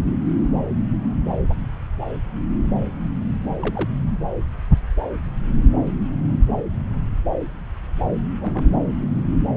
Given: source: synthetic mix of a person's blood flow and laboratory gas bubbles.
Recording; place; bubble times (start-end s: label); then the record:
Doppler ultrasound of blood flow; subclavian vein
1.48-1.54 s: bubbles
3.62-3.90 s: bubbles
8.41-8.65 s: bubbles
From the record:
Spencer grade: 2 (many but less than half of the cardiac periods contain bubble signals, singularly or in groups); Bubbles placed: anywhere in the cardiac cycle